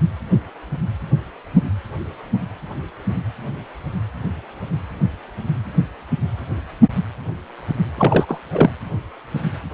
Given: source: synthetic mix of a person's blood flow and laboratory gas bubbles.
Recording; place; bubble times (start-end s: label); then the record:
Doppler ultrasound of blood flow; precordium
7.97-8.25 s: bubbles
8.28-8.40 s: bubbles
8.51-8.71 s: bubbles
From the record:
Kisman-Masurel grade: 213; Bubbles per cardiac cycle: several, 3 to 8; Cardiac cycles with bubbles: 1 to 10%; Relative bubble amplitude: loud (0.450 to 0.775); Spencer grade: 1 (occasional bubble signal discernible with the cardiac motion signal, with majority of cardiac periods free of bubbles); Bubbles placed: anywhere in the cardiac cycle